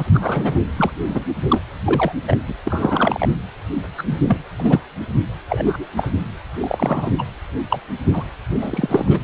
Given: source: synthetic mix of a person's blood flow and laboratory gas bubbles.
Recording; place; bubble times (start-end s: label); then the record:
Doppler ultrasound of blood flow; precordium
0.00-0.60 s: bubbles
0.77-0.91 s: bubbles
1.09-1.24 s: bubbles
1.48-1.60 s: bubbles
1.85-2.12 s: bubbles
2.27-2.38 s: bubbles
2.48-2.55 s: bubbles
2.65-3.29 s: bubbles
3.98-4.03 s: bubbles
4.07-4.18 s: bubbles
4.27-4.38 s: bubbles
4.56-4.82 s: bubbles
5.48-5.85 s: bubbles
5.96-6.12 s: bubbles
6.54-7.11 s: bubbles
7.18-7.23 s: bubbles
7.70-7.80 s: bubbles
8.13-8.24 s: bubbles
8.50-9.20 s: bubbles
From the record:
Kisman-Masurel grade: 243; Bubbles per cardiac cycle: several, 3 to 8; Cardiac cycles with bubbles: 100%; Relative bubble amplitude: loud (0.450 to 0.775); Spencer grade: 3 (all of the cardiac periods contain showers or single bubble signals, but not dominating or overriding the cardiac motion signals); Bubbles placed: anywhere in the cardiac cycle